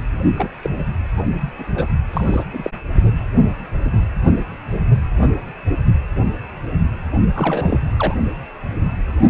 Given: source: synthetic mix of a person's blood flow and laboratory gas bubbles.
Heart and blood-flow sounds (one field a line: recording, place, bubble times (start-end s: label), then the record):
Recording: Doppler ultrasound of blood flow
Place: precordium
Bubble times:
0.37-0.50 s: bubbles
0.62-0.70 s: bubbles
1.17-1.22 s: bubbles
1.58-1.65 s: bubbles
1.75-1.88 s: bubbles
2.13-2.44 s: bubbles
2.52-2.70 s: bubbles
7.34-7.79 s: bubbles
7.96-8.15 s: bubbles
From the record:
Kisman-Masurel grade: 222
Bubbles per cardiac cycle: several, 3 to 8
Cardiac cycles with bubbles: 10 to 50%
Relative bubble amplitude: moderate (0.250 to 0.450)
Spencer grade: 2 (many but less than half of the cardiac periods contain bubble signals, singularly or in groups)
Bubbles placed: only in the low amplitude regions of the cardiac cycle